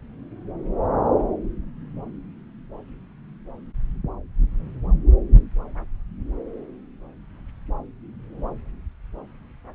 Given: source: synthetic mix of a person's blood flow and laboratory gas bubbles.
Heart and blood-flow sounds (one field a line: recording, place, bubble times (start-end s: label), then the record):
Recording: Doppler ultrasound of blood flow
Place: subclavian vein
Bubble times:
no bubbles
From the record:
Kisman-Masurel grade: 000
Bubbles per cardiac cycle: 0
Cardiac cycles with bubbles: 0%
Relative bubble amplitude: no bubbles discernible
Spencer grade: 0 (complete lack of bubble signals)